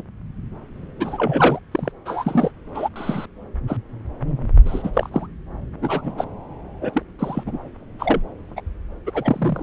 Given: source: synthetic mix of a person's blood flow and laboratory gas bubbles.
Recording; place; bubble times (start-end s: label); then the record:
Doppler ultrasound of blood flow; subclavian vein
0.00-0.03 s: bubbles
1.00-1.59 s: bubbles
1.71-1.92 s: bubbles
2.05-2.51 s: bubbles
2.74-2.89 s: bubbles
2.96-3.26 s: bubbles
3.67-3.77 s: bubbles
4.66-4.90 s: bubbles
4.94-5.10 s: bubbles
5.12-5.27 s: bubbles
5.82-6.12 s: bubbles
6.18-6.25 s: bubbles
6.81-6.90 s: bubbles
6.93-7.02 s: bubbles
7.19-7.44 s: bubbles
7.46-7.69 s: bubbles
7.99-8.20 s: bubbles
8.56-8.61 s: bubbles
9.06-9.11 s: bubbles
9.13-9.63 s: bubbles
From the record:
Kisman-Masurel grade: 232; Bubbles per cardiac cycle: several, 3 to 8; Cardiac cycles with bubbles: 50 to 99%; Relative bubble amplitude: moderate (0.250 to 0.450); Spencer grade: 3 (all of the cardiac periods contain showers or single bubble signals, but not dominating or overriding the cardiac motion signals); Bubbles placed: anywhere in the cardiac cycle